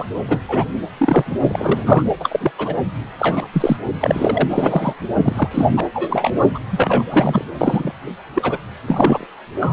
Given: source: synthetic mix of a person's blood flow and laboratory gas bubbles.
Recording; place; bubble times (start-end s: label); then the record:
Doppler ultrasound of blood flow; precordium
0.00-0.05 s: bubbles
0.28-0.41 s: bubbles
0.48-0.76 s: bubbles
0.97-1.38 s: bubbles
1.48-2.03 s: bubbles
2.19-2.52 s: bubbles
2.58-2.75 s: bubbles
3.19-3.46 s: bubbles
3.52-3.77 s: bubbles
3.99-4.94 s: bubbles
5.23-5.69 s: bubbles
5.77-5.81 s: bubbles
5.94-6.32 s: bubbles
6.54-6.59 s: bubbles
6.71-7.04 s: bubbles
7.11-7.45 s: bubbles
7.58-7.93 s: bubbles
8.34-8.58 s: bubbles
8.88-9.27 s: bubbles
9.59-9.73 s: bubbles
From the record:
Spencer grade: 3 (all of the cardiac periods contain showers or single bubble signals, but not dominating or overriding the cardiac motion signals); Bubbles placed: anywhere in the cardiac cycle